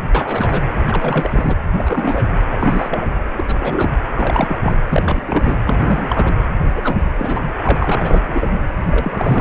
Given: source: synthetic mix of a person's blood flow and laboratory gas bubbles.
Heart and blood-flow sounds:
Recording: Doppler ultrasound of blood flow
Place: precordium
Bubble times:
0.15-0.62 s: bubbles
0.87-1.56 s: bubbles
1.78-2.25 s: bubbles
2.51-3.09 s: bubbles
3.36-3.94 s: bubbles
4.18-4.56 s: bubbles
4.60-4.77 s: bubbles
4.88-5.21 s: bubbles
5.25-5.56 s: bubbles
5.66-6.33 s: bubbles
6.74-7.12 s: bubbles
7.18-7.51 s: bubbles
7.64-8.59 s: bubbles
8.87-9.41 s: bubbles
From the record:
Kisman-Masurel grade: 342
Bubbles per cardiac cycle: rolling drumbeat, 9 or more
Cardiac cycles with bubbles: 100%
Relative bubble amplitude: moderate (0.250 to 0.450)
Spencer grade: 3 (all of the cardiac periods contain showers or single bubble signals, but not dominating or overriding the cardiac motion signals)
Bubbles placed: anywhere in the cardiac cycle

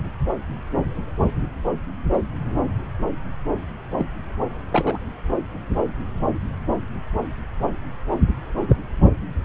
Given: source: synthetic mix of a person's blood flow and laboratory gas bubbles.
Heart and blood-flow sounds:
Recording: Doppler ultrasound of blood flow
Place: subclavian vein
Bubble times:
2.13-2.20 s: bubbles
3.98-4.05 s: bubbles
4.71-4.97 s: bubbles
8.68-8.76 s: bubbles
From the record:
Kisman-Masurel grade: 122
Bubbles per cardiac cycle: 1 to 2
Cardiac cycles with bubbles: 10 to 50%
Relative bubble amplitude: moderate (0.250 to 0.450)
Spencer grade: 2 (many but less than half of the cardiac periods contain bubble signals, singularly or in groups)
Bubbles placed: anywhere in the cardiac cycle

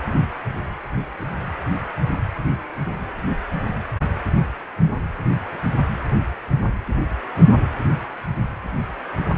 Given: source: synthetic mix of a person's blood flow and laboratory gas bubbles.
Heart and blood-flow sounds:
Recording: Doppler ultrasound of blood flow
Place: precordium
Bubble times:
no bubbles
From the record:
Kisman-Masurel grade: 000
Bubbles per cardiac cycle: 0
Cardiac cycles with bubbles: 0%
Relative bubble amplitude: no bubbles discernible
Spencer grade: 0 (complete lack of bubble signals)

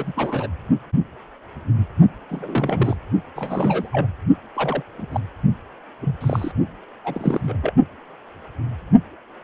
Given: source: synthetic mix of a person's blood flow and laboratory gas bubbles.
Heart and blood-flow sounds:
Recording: Doppler ultrasound of blood flow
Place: precordium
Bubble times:
0.00-0.12 s: bubbles
0.15-0.47 s: bubbles
2.30-2.97 s: bubbles
3.36-3.89 s: bubbles
3.92-4.07 s: bubbles
4.54-4.83 s: bubbles
4.97-5.07 s: bubbles
5.11-5.20 s: bubbles
6.00-6.15 s: bubbles
6.21-6.52 s: bubbles
7.04-7.57 s: bubbles
7.62-7.73 s: bubbles
From the record:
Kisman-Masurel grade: 232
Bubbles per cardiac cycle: several, 3 to 8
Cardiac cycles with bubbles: 50 to 99%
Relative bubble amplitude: moderate (0.250 to 0.450)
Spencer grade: 3 (all of the cardiac periods contain showers or single bubble signals, but not dominating or overriding the cardiac motion signals)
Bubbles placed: only in the low amplitude regions of the cardiac cycle

